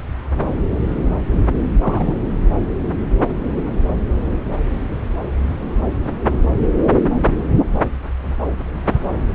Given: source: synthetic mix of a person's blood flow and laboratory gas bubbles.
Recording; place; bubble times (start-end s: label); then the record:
Doppler ultrasound of blood flow; subclavian vein
1.82-2.17 s: bubbles
From the record:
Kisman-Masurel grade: 212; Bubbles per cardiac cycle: several, 3 to 8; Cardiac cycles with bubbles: 1 to 10%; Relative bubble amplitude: moderate (0.250 to 0.450); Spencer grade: 1 (occasional bubble signal discernible with the cardiac motion signal, with majority of cardiac periods free of bubbles); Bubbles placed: anywhere in the cardiac cycle